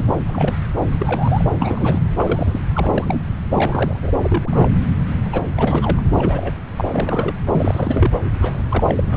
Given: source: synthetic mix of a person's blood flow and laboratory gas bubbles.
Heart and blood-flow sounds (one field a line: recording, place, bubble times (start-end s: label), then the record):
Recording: Doppler ultrasound of blood flow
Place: subclavian vein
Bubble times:
0.00-0.05 s: bubbles
0.09-0.15 s: bubbles
0.26-0.57 s: bubbles
0.80-0.87 s: bubbles
0.98-1.46 s: bubbles
1.58-1.99 s: bubbles
2.16-2.60 s: bubbles
2.74-3.23 s: bubbles
3.51-4.12 s: bubbles
4.23-4.69 s: bubbles
5.24-5.48 s: bubbles
5.57-6.03 s: bubbles
6.16-6.54 s: bubbles
6.76-6.89 s: bubbles
6.92-7.33 s: bubbles
7.52-8.12 s: bubbles
8.42-8.62 s: bubbles
8.69-8.84 s: bubbles
8.87-9.02 s: bubbles
9.07-9.17 s: bubbles
From the record:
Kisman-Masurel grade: 242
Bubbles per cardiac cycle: several, 3 to 8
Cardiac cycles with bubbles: 100%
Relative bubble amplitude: moderate (0.250 to 0.450)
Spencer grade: 3 (all of the cardiac periods contain showers or single bubble signals, but not dominating or overriding the cardiac motion signals)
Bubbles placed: anywhere in the cardiac cycle